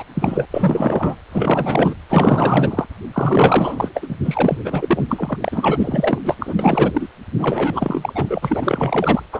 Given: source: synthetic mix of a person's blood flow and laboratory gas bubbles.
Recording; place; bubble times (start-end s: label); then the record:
Doppler ultrasound of blood flow; precordium
0.00-0.03 s: bubbles
0.14-0.45 s: bubbles
0.51-1.15 s: bubbles
1.30-1.95 s: bubbles
2.09-2.85 s: bubbles
3.12-3.88 s: bubbles
3.94-4.16 s: bubbles
4.25-4.58 s: bubbles
4.64-5.03 s: bubbles
5.09-5.37 s: bubbles
5.41-6.19 s: bubbles
6.24-6.35 s: bubbles
6.40-6.55 s: bubbles
6.59-7.08 s: bubbles
7.38-9.23 s: bubbles
9.32-9.40 s: bubbles
From the record:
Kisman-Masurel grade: 444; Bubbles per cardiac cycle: continuous sound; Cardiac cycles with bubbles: 100%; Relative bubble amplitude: maximal (0.775 to 0.999); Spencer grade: 4 (maximum detectable bubble signal sounding continuously throughout systole and diastole of every cardiac period, and overriding the amplitude of the normal cardiac signals); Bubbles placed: anywhere in the cardiac cycle